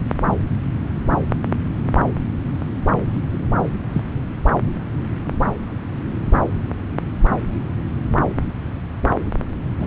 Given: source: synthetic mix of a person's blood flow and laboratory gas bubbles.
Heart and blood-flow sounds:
Doppler ultrasound of blood flow; subclavian vein
3.93-4.02 s: bubbles
9.79-9.87 s: bubbles
From the record:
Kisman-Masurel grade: 122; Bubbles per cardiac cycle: 1 to 2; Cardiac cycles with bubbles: 10 to 50%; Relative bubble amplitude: moderate (0.250 to 0.450); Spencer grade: 2 (many but less than half of the cardiac periods contain bubble signals, singularly or in groups); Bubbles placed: anywhere in the cardiac cycle

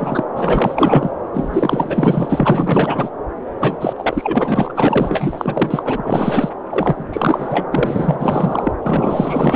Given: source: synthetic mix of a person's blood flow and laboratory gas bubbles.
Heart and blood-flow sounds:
Doppler ultrasound of blood flow; subclavian vein
0.00-0.24 s: bubbles
0.35-1.13 s: bubbles
1.33-3.10 s: bubbles
3.60-3.76 s: bubbles
3.81-3.94 s: bubbles
3.96-6.50 s: bubbles
6.70-7.04 s: bubbles
7.12-7.67 s: bubbles
7.71-8.72 s: bubbles
8.81-9.56 s: bubbles
From the record:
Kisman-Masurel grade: 444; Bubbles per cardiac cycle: continuous sound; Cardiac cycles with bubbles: 100%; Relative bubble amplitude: maximal (0.775 to 0.999); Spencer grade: 4 (maximum detectable bubble signal sounding continuously throughout systole and diastole of every cardiac period, and overriding the amplitude of the normal cardiac signals); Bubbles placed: anywhere in the cardiac cycle

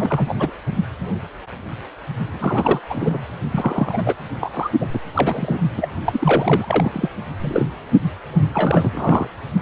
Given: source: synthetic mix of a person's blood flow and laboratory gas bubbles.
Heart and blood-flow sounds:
Doppler ultrasound of blood flow; precordium
0.00-0.35 s: bubbles
0.39-0.51 s: bubbles
2.33-2.80 s: bubbles
2.90-3.19 s: bubbles
3.52-4.13 s: bubbles
4.40-4.49 s: bubbles
4.53-4.70 s: bubbles
4.80-4.86 s: bubbles
4.93-4.99 s: bubbles
5.14-5.56 s: bubbles
5.77-5.88 s: bubbles
6.05-7.08 s: bubbles
7.40-7.67 s: bubbles
8.52-9.27 s: bubbles
From the record:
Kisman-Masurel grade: 332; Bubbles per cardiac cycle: rolling drumbeat, 9 or more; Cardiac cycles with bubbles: 50 to 99%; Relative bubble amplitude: moderate (0.250 to 0.450); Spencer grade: 3 (all of the cardiac periods contain showers or single bubble signals, but not dominating or overriding the cardiac motion signals); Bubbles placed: only in the low amplitude regions of the cardiac cycle

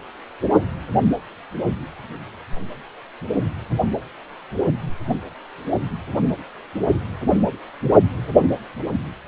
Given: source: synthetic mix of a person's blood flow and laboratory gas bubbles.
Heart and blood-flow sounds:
Doppler ultrasound of blood flow; precordium
no bubbles
From the record:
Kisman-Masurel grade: 000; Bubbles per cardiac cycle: 0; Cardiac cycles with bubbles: 0%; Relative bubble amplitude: no bubbles discernible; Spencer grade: 0 (complete lack of bubble signals)

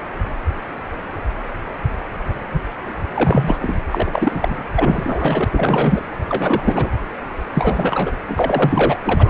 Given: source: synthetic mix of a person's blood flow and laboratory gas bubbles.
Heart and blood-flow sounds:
Doppler ultrasound of blood flow; precordium
3.15-3.56 s: bubbles
3.62-3.76 s: bubbles
3.90-4.62 s: bubbles
4.75-5.45 s: bubbles
5.57-6.00 s: bubbles
6.29-6.89 s: bubbles
7.54-8.14 s: bubbles
8.29-8.97 s: bubbles
9.05-9.30 s: bubbles
From the record:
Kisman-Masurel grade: 332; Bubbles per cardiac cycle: rolling drumbeat, 9 or more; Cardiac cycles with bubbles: 50 to 99%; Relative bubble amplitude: moderate (0.250 to 0.450); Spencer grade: 3 (all of the cardiac periods contain showers or single bubble signals, but not dominating or overriding the cardiac motion signals); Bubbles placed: anywhere in the cardiac cycle

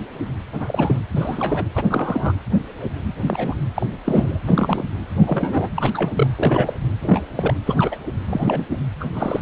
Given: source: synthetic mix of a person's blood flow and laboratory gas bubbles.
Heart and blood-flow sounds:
Doppler ultrasound of blood flow; precordium
0.53-1.00 s: bubbles
1.12-1.66 s: bubbles
1.75-1.84 s: bubbles
1.90-2.33 s: bubbles
3.21-3.54 s: bubbles
3.75-3.87 s: bubbles
4.05-4.38 s: bubbles
4.43-4.83 s: bubbles
5.19-5.68 s: bubbles
5.76-5.91 s: bubbles
5.94-6.13 s: bubbles
6.16-6.27 s: bubbles
6.35-6.75 s: bubbles
7.00-7.22 s: bubbles
7.37-7.54 s: bubbles
7.65-7.98 s: bubbles
8.28-8.65 s: bubbles
8.71-8.78 s: bubbles
9.00-9.05 s: bubbles
9.15-9.41 s: bubbles
From the record:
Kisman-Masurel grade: 232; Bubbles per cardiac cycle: several, 3 to 8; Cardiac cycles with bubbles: 50 to 99%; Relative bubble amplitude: moderate (0.250 to 0.450); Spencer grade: 3 (all of the cardiac periods contain showers or single bubble signals, but not dominating or overriding the cardiac motion signals); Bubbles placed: anywhere in the cardiac cycle

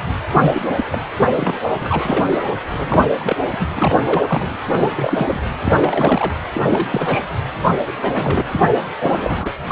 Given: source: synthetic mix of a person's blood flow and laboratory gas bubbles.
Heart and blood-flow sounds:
Doppler ultrasound of blood flow; precordium
0.40-0.62 s: bubbles
0.69-0.84 s: bubbles
0.92-0.99 s: bubbles
1.33-1.72 s: bubbles
1.82-2.39 s: bubbles
2.45-2.53 s: bubbles
2.71-3.12 s: bubbles
3.19-3.36 s: bubbles
3.51-3.68 s: bubbles
3.75-4.03 s: bubbles
4.06-4.22 s: bubbles
4.27-4.57 s: bubbles
4.65-5.42 s: bubbles
5.65-6.33 s: bubbles
6.54-6.87 s: bubbles
6.91-7.24 s: bubbles
7.62-7.69 s: bubbles
7.87-7.92 s: bubbles
8.01-8.44 s: bubbles
8.52-8.68 s: bubbles
9.03-9.48 s: bubbles
9.67-9.72 s: bubbles
From the record:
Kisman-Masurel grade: 342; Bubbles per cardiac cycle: rolling drumbeat, 9 or more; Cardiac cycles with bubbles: 100%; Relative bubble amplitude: moderate (0.250 to 0.450); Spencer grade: 3 (all of the cardiac periods contain showers or single bubble signals, but not dominating or overriding the cardiac motion signals); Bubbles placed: anywhere in the cardiac cycle

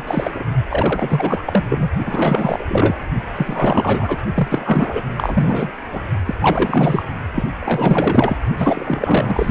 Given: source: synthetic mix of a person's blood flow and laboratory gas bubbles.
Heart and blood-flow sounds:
Doppler ultrasound of blood flow; precordium
0.00-0.04 s: bubbles
0.07-0.44 s: bubbles
0.70-1.65 s: bubbles
1.69-1.89 s: bubbles
2.06-2.95 s: bubbles
3.35-4.17 s: bubbles
4.34-5.02 s: bubbles
5.17-5.71 s: bubbles
5.92-6.01 s: bubbles
6.26-6.35 s: bubbles
6.41-7.03 s: bubbles
7.35-7.44 s: bubbles
7.61-8.38 s: bubbles
8.57-9.51 s: bubbles
From the record:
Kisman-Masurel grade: 444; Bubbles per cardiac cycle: continuous sound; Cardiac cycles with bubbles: 100%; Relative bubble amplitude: maximal (0.775 to 0.999); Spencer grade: 4 (maximum detectable bubble signal sounding continuously throughout systole and diastole of every cardiac period, and overriding the amplitude of the normal cardiac signals); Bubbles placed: only in the low amplitude regions of the cardiac cycle

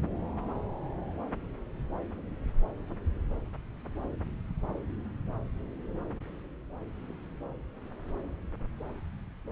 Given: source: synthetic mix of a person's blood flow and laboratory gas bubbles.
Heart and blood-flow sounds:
Doppler ultrasound of blood flow; subclavian vein
no bubbles
From the record:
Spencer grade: 0 (complete lack of bubble signals)

